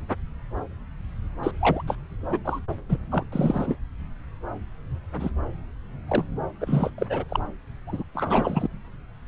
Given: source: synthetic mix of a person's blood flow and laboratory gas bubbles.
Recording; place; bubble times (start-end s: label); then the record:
Doppler ultrasound of blood flow; subclavian vein
1.43-1.51 s: bubbles
1.60-1.82 s: bubbles
1.87-1.96 s: bubbles
2.29-2.38 s: bubbles
2.45-2.59 s: bubbles
2.89-2.99 s: bubbles
3.12-3.25 s: bubbles
3.32-3.75 s: bubbles
5.19-5.31 s: bubbles
6.08-6.24 s: bubbles
6.61-6.90 s: bubbles
6.98-7.07 s: bubbles
7.09-7.24 s: bubbles
7.29-7.40 s: bubbles
7.87-8.03 s: bubbles
8.14-8.67 s: bubbles
From the record:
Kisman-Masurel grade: 232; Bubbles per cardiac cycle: several, 3 to 8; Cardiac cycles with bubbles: 50 to 99%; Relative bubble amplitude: moderate (0.250 to 0.450); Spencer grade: 3 (all of the cardiac periods contain showers or single bubble signals, but not dominating or overriding the cardiac motion signals); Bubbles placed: anywhere in the cardiac cycle